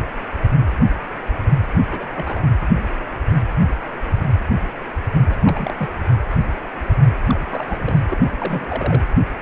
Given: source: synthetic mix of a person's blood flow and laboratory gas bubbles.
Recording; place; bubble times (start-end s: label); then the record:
Doppler ultrasound of blood flow; precordium
1.91-2.05 s: bubbles
2.16-2.39 s: bubbles
5.29-5.35 s: bubbles
5.41-5.74 s: bubbles
5.77-5.95 s: bubbles
7.26-7.78 s: bubbles
7.80-8.00 s: bubbles
8.10-8.17 s: bubbles
8.38-9.02 s: bubbles
From the record:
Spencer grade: 2 (many but less than half of the cardiac periods contain bubble signals, singularly or in groups); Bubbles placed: anywhere in the cardiac cycle